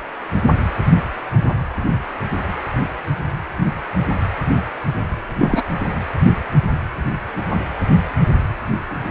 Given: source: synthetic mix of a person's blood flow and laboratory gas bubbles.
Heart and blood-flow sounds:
Doppler ultrasound of blood flow; precordium
5.38-5.63 s: bubbles
From the record:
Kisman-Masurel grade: 223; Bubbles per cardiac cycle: several, 3 to 8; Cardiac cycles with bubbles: 10 to 50%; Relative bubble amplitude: loud (0.450 to 0.775); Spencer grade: 2 (many but less than half of the cardiac periods contain bubble signals, singularly or in groups); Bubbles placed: anywhere in the cardiac cycle

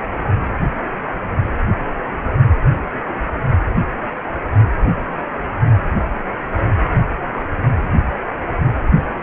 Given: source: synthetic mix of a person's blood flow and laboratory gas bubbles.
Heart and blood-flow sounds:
Doppler ultrasound of blood flow; precordium
no bubbles
From the record:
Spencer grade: 0 (complete lack of bubble signals)

